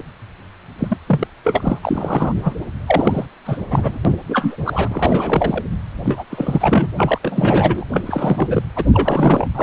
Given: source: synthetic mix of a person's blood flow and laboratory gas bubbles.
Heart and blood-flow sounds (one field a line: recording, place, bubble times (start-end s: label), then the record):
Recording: Doppler ultrasound of blood flow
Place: precordium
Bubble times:
0.00-0.03 s: bubbles
0.79-0.98 s: bubbles
1.07-1.28 s: bubbles
1.45-1.79 s: bubbles
1.83-2.56 s: bubbles
2.88-3.25 s: bubbles
3.45-3.58 s: bubbles
3.71-3.99 s: bubbles
4.05-4.16 s: bubbles
4.28-4.57 s: bubbles
4.66-5.62 s: bubbles
6.03-6.25 s: bubbles
6.30-6.88 s: bubbles
6.97-7.18 s: bubbles
7.22-7.84 s: bubbles
7.92-8.62 s: bubbles
8.76-8.84 s: bubbles
8.93-9.47 s: bubbles
9.54-9.63 s: bubbles
From the record:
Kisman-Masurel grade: 342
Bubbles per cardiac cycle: rolling drumbeat, 9 or more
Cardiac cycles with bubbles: 100%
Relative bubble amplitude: moderate (0.250 to 0.450)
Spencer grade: 3 (all of the cardiac periods contain showers or single bubble signals, but not dominating or overriding the cardiac motion signals)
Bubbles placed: anywhere in the cardiac cycle